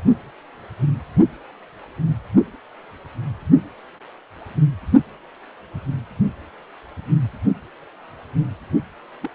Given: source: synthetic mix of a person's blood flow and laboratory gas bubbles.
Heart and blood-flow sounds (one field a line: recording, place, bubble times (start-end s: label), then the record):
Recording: Doppler ultrasound of blood flow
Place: precordium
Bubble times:
9.21-9.30 s: bubbles
From the record:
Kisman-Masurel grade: 111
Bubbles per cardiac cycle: 1 to 2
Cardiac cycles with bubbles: 1 to 10%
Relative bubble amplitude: barely perceptible (0.100 to 0.250)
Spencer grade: 1 (occasional bubble signal discernible with the cardiac motion signal, with majority of cardiac periods free of bubbles)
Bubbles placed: only in the low amplitude regions of the cardiac cycle